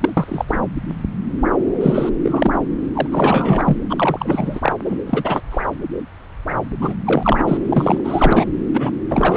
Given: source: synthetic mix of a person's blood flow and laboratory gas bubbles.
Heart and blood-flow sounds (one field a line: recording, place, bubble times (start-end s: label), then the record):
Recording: Doppler ultrasound of blood flow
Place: subclavian vein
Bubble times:
0.00-0.10 s: bubbles
0.16-0.45 s: bubbles
0.48-0.58 s: bubbles
1.80-2.10 s: bubbles
2.23-2.58 s: bubbles
2.94-3.07 s: bubbles
3.10-3.77 s: bubbles
3.90-4.75 s: bubbles
4.85-4.99 s: bubbles
5.06-5.40 s: bubbles
5.51-5.61 s: bubbles
6.81-6.94 s: bubbles
7.04-7.43 s: bubbles
7.47-7.57 s: bubbles
7.70-8.00 s: bubbles
8.04-8.45 s: bubbles
8.67-8.91 s: bubbles
9.09-9.37 s: bubbles
From the record:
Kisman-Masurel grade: 333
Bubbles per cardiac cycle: rolling drumbeat, 9 or more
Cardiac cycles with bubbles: 50 to 99%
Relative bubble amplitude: loud (0.450 to 0.775)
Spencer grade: 3 (all of the cardiac periods contain showers or single bubble signals, but not dominating or overriding the cardiac motion signals)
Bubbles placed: anywhere in the cardiac cycle